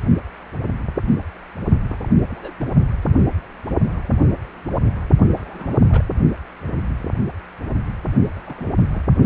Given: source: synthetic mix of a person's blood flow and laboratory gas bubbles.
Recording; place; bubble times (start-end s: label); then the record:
Doppler ultrasound of blood flow; precordium
1.83-2.08 s: bubbles
2.21-2.52 s: bubbles
2.60-2.70 s: bubbles
5.36-5.78 s: bubbles
5.89-6.03 s: bubbles
8.36-8.39 s: bubbles
8.46-8.70 s: bubbles
8.78-8.88 s: bubbles
8.93-9.03 s: bubbles
From the record:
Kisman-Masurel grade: 221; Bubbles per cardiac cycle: several, 3 to 8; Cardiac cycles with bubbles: 10 to 50%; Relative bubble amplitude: barely perceptible (0.100 to 0.250); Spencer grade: 2 (many but less than half of the cardiac periods contain bubble signals, singularly or in groups); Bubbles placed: only in the low amplitude regions of the cardiac cycle